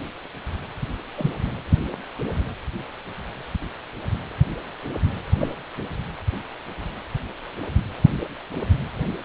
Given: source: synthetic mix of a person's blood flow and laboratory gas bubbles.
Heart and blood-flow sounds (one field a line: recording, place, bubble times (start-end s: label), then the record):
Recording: Doppler ultrasound of blood flow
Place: precordium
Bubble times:
1.17-1.31 s: bubbles
5.40-5.53 s: bubbles
From the record:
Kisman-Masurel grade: 122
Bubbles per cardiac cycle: 1 to 2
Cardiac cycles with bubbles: 10 to 50%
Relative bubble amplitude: moderate (0.250 to 0.450)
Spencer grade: 2 (many but less than half of the cardiac periods contain bubble signals, singularly or in groups)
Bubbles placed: anywhere in the cardiac cycle